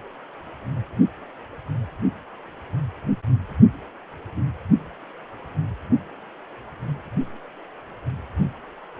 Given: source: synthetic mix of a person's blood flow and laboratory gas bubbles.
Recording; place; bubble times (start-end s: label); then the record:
Doppler ultrasound of blood flow; precordium
no bubbles
From the record:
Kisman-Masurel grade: 000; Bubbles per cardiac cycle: 0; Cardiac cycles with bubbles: 0%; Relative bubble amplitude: no bubbles discernible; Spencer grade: 0 (complete lack of bubble signals)